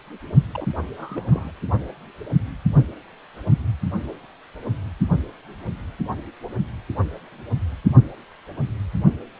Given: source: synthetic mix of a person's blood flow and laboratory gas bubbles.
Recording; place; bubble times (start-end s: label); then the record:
Doppler ultrasound of blood flow; precordium
0.52-0.66 s: bubbles
0.96-1.52 s: bubbles
From the record:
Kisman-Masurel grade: 211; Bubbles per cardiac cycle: several, 3 to 8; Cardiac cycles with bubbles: 1 to 10%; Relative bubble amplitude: barely perceptible (0.100 to 0.250); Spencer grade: 1 (occasional bubble signal discernible with the cardiac motion signal, with majority of cardiac periods free of bubbles); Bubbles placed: only in the low amplitude regions of the cardiac cycle